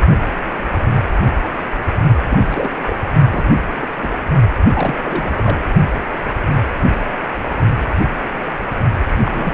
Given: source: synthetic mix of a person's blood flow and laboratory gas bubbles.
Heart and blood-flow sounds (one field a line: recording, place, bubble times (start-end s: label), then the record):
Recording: Doppler ultrasound of blood flow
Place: precordium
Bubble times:
2.30-2.69 s: bubbles
2.85-2.96 s: bubbles
3.30-3.46 s: bubbles
3.67-3.85 s: bubbles
4.00-4.16 s: bubbles
4.75-4.95 s: bubbles
5.03-5.67 s: bubbles
9.24-9.54 s: bubbles
From the record:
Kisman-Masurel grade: 232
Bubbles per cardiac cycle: several, 3 to 8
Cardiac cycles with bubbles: 50 to 99%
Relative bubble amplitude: moderate (0.250 to 0.450)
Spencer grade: 3 (all of the cardiac periods contain showers or single bubble signals, but not dominating or overriding the cardiac motion signals)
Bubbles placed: only in the low amplitude regions of the cardiac cycle